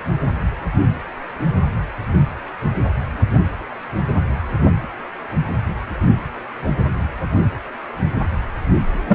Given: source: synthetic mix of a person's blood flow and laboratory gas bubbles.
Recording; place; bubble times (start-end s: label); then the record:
Doppler ultrasound of blood flow; precordium
9.07-9.15 s: bubbles
From the record:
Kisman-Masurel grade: 113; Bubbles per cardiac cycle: 1 to 2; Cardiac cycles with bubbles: 1 to 10%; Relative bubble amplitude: loud (0.450 to 0.775); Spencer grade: 1 (occasional bubble signal discernible with the cardiac motion signal, with majority of cardiac periods free of bubbles); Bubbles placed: anywhere in the cardiac cycle